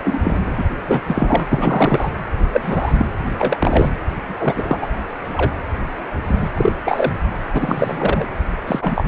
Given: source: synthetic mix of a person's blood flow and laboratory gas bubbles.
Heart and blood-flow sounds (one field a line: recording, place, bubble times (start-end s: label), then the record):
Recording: Doppler ultrasound of blood flow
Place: precordium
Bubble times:
0.00-0.19 s: bubbles
0.24-0.40 s: bubbles
0.56-0.65 s: bubbles
0.88-1.01 s: bubbles
1.07-1.47 s: bubbles
1.52-2.10 s: bubbles
2.52-3.06 s: bubbles
3.38-3.89 s: bubbles
4.26-4.78 s: bubbles
4.81-4.87 s: bubbles
5.34-5.50 s: bubbles
6.25-6.49 s: bubbles
6.54-6.72 s: bubbles
6.84-7.13 s: bubbles
7.54-8.29 s: bubbles
8.67-9.04 s: bubbles
From the record:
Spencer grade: 3 (all of the cardiac periods contain showers or single bubble signals, but not dominating or overriding the cardiac motion signals)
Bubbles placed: anywhere in the cardiac cycle